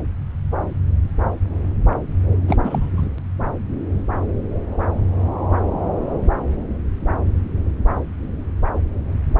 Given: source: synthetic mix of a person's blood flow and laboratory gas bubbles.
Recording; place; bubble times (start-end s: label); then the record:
Doppler ultrasound of blood flow; subclavian vein
2.48-2.56 s: bubbles
2.63-2.90 s: bubbles
2.96-3.08 s: bubbles
From the record:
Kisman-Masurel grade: 212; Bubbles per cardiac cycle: several, 3 to 8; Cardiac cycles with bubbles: 1 to 10%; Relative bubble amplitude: moderate (0.250 to 0.450); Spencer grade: 1 (occasional bubble signal discernible with the cardiac motion signal, with majority of cardiac periods free of bubbles); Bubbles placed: anywhere in the cardiac cycle